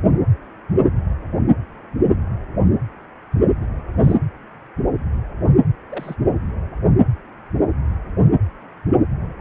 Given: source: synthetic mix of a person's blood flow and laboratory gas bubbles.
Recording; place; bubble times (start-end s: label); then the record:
Doppler ultrasound of blood flow; precordium
3.57-3.66 s: bubbles
4.03-4.17 s: bubbles
5.92-6.15 s: bubbles
From the record:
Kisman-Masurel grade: 121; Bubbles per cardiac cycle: 1 to 2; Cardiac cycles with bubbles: 10 to 50%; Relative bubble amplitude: barely perceptible (0.100 to 0.250); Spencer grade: 2 (many but less than half of the cardiac periods contain bubble signals, singularly or in groups); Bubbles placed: anywhere in the cardiac cycle